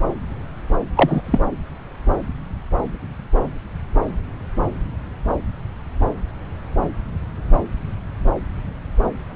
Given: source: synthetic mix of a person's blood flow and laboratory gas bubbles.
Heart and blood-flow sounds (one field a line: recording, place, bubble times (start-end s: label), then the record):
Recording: Doppler ultrasound of blood flow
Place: subclavian vein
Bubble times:
0.96-1.22 s: bubbles
1.26-1.39 s: bubbles
From the record:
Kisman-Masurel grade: 213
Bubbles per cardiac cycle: several, 3 to 8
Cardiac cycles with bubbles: 1 to 10%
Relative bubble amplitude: loud (0.450 to 0.775)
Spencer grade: 1 (occasional bubble signal discernible with the cardiac motion signal, with majority of cardiac periods free of bubbles)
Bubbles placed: anywhere in the cardiac cycle